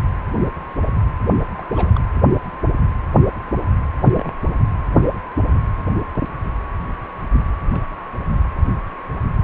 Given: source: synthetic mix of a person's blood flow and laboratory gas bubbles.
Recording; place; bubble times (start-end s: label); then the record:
Doppler ultrasound of blood flow; precordium
1.57-1.92 s: bubbles
1.95-2.00 s: bubbles
4.16-4.33 s: bubbles
5.55-5.59 s: bubbles
7.71-7.80 s: bubbles
From the record:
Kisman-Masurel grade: 121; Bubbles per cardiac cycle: 1 to 2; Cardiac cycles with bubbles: 10 to 50%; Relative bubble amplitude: barely perceptible (0.100 to 0.250); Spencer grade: 2 (many but less than half of the cardiac periods contain bubble signals, singularly or in groups); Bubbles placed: anywhere in the cardiac cycle